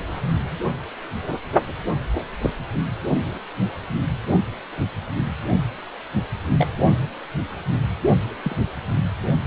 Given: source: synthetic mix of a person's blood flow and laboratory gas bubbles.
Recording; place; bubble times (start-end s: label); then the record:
Doppler ultrasound of blood flow; precordium
2.40-2.50 s: bubbles
6.58-6.67 s: bubbles
8.43-8.56 s: bubbles
From the record:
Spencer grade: 2 (many but less than half of the cardiac periods contain bubble signals, singularly or in groups); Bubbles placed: anywhere in the cardiac cycle